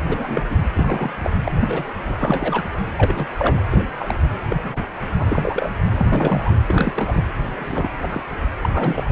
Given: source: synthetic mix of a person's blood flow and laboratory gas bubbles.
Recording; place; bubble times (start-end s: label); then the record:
Doppler ultrasound of blood flow; precordium
0.08-0.43 s: bubbles
0.50-0.66 s: bubbles
0.74-1.14 s: bubbles
1.24-1.36 s: bubbles
1.45-1.85 s: bubbles
2.04-2.63 s: bubbles
2.97-3.26 s: bubbles
3.32-3.62 s: bubbles
3.70-3.84 s: bubbles
3.99-4.16 s: bubbles
4.48-4.84 s: bubbles
5.18-5.70 s: bubbles
5.95-6.51 s: bubbles
6.68-6.92 s: bubbles
6.96-7.22 s: bubbles
7.46-7.89 s: bubbles
8.02-8.23 s: bubbles
8.62-8.70 s: bubbles
8.72-9.04 s: bubbles
From the record:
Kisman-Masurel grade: 242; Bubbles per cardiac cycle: several, 3 to 8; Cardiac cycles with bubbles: 100%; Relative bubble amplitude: moderate (0.250 to 0.450); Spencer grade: 3 (all of the cardiac periods contain showers or single bubble signals, but not dominating or overriding the cardiac motion signals); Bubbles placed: anywhere in the cardiac cycle